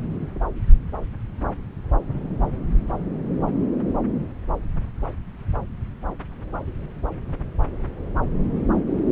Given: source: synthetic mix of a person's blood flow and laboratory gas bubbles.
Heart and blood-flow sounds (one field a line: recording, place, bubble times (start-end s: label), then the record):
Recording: Doppler ultrasound of blood flow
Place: subclavian vein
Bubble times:
no bubbles
From the record:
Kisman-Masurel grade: 000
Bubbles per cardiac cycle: 0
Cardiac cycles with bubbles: 0%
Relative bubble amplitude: no bubbles discernible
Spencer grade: 0 (complete lack of bubble signals)